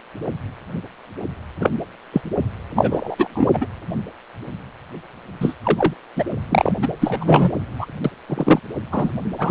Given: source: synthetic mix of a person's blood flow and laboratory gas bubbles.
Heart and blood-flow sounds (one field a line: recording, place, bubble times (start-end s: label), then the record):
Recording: Doppler ultrasound of blood flow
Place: precordium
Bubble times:
1.59-1.70 s: bubbles
2.12-2.21 s: bubbles
2.75-3.67 s: bubbles
5.41-5.54 s: bubbles
5.63-5.93 s: bubbles
6.16-6.24 s: bubbles
6.50-6.71 s: bubbles
6.82-6.88 s: bubbles
7.00-7.51 s: bubbles
7.78-7.86 s: bubbles
8.04-8.11 s: bubbles
8.29-8.60 s: bubbles
8.91-9.11 s: bubbles
9.38-9.51 s: bubbles
From the record:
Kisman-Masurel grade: 233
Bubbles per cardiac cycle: several, 3 to 8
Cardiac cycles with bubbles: 50 to 99%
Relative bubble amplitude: loud (0.450 to 0.775)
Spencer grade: 3 (all of the cardiac periods contain showers or single bubble signals, but not dominating or overriding the cardiac motion signals)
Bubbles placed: anywhere in the cardiac cycle